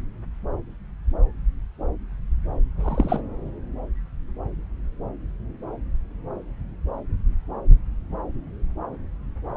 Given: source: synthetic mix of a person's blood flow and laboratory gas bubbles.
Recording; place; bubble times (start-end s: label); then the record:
Doppler ultrasound of blood flow; subclavian vein
2.80-3.21 s: bubbles
From the record:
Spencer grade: 1 (occasional bubble signal discernible with the cardiac motion signal, with majority of cardiac periods free of bubbles); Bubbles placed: anywhere in the cardiac cycle